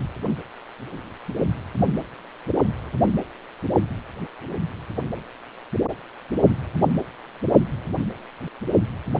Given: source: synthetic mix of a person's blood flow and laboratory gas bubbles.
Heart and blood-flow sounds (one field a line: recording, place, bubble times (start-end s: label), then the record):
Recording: Doppler ultrasound of blood flow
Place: precordium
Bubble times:
no bubbles
From the record:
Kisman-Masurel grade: 000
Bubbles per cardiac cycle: 0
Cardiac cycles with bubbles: 0%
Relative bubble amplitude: no bubbles discernible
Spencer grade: 0 (complete lack of bubble signals)